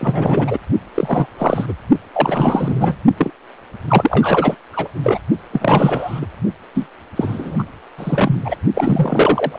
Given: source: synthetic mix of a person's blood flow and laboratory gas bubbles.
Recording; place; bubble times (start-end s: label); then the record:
Doppler ultrasound of blood flow; precordium
0.00-0.57 s: bubbles
0.94-1.27 s: bubbles
1.38-1.74 s: bubbles
2.13-2.96 s: bubbles
3.17-3.30 s: bubbles
3.88-4.55 s: bubbles
4.73-4.88 s: bubbles
5.03-5.18 s: bubbles
5.52-6.26 s: bubbles
6.75-6.87 s: bubbles
7.16-7.64 s: bubbles
7.98-8.56 s: bubbles
8.75-9.59 s: bubbles
From the record:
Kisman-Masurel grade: 343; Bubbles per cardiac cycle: rolling drumbeat, 9 or more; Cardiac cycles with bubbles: 100%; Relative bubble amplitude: loud (0.450 to 0.775); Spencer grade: 3 (all of the cardiac periods contain showers or single bubble signals, but not dominating or overriding the cardiac motion signals); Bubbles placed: only in the low amplitude regions of the cardiac cycle